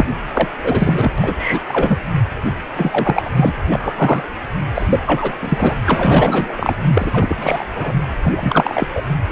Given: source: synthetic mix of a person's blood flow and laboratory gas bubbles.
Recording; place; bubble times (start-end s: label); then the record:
Doppler ultrasound of blood flow; precordium
0.00-0.06 s: bubbles
0.34-0.48 s: bubbles
0.63-1.12 s: bubbles
1.18-1.65 s: bubbles
1.68-1.99 s: bubbles
2.76-3.31 s: bubbles
3.35-3.54 s: bubbles
3.69-4.24 s: bubbles
4.74-5.00 s: bubbles
5.05-5.33 s: bubbles
5.41-5.75 s: bubbles
5.86-6.75 s: bubbles
6.88-7.66 s: bubbles
7.75-7.93 s: bubbles
8.22-8.87 s: bubbles
8.90-9.04 s: bubbles
9.28-9.32 s: bubbles
From the record:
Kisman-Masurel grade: 343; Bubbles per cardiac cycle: rolling drumbeat, 9 or more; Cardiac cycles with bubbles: 100%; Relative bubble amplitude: loud (0.450 to 0.775); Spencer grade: 3 (all of the cardiac periods contain showers or single bubble signals, but not dominating or overriding the cardiac motion signals); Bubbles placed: anywhere in the cardiac cycle